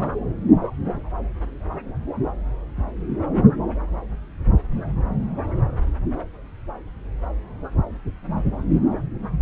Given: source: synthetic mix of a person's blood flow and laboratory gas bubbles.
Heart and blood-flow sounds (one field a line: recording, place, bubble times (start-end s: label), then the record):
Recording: Doppler ultrasound of blood flow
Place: subclavian vein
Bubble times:
0.01-0.11 s: bubbles
From the record:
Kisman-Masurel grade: 112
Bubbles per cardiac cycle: 1 to 2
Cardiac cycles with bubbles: 1 to 10%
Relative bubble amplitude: moderate (0.250 to 0.450)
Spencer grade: 1 (occasional bubble signal discernible with the cardiac motion signal, with majority of cardiac periods free of bubbles)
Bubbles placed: anywhere in the cardiac cycle